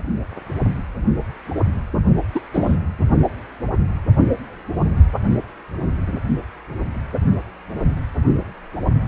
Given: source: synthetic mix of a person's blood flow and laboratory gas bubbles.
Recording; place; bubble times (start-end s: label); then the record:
Doppler ultrasound of blood flow; precordium
2.35-2.40 s: bubbles
2.54-2.76 s: bubbles
From the record:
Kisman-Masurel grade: 113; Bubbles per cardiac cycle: 1 to 2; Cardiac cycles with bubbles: 1 to 10%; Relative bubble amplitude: loud (0.450 to 0.775); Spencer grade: 1 (occasional bubble signal discernible with the cardiac motion signal, with majority of cardiac periods free of bubbles); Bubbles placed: only in the low amplitude regions of the cardiac cycle